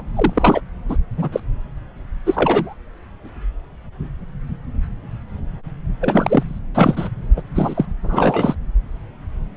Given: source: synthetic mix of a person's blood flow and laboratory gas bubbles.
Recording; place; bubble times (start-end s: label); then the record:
Doppler ultrasound of blood flow; subclavian vein
0.00-0.03 s: bubbles
0.15-0.60 s: bubbles
0.89-0.97 s: bubbles
1.17-1.29 s: bubbles
1.32-1.40 s: bubbles
2.26-2.75 s: bubbles
6.00-6.59 s: bubbles
6.74-7.08 s: bubbles
7.36-7.42 s: bubbles
7.54-7.86 s: bubbles
8.03-8.55 s: bubbles
From the record:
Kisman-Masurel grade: 233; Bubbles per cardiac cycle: several, 3 to 8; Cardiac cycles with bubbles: 50 to 99%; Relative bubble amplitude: loud (0.450 to 0.775); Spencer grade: 3 (all of the cardiac periods contain showers or single bubble signals, but not dominating or overriding the cardiac motion signals); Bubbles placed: anywhere in the cardiac cycle